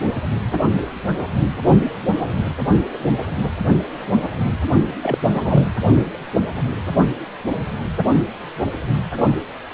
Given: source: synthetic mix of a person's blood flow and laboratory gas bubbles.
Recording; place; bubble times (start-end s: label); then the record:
Doppler ultrasound of blood flow; precordium
5.02-5.18 s: bubbles
5.27-5.63 s: bubbles
From the record:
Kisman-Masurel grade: 212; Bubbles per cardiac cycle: several, 3 to 8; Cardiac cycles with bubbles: 1 to 10%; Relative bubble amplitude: moderate (0.250 to 0.450); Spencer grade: 1 (occasional bubble signal discernible with the cardiac motion signal, with majority of cardiac periods free of bubbles); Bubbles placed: anywhere in the cardiac cycle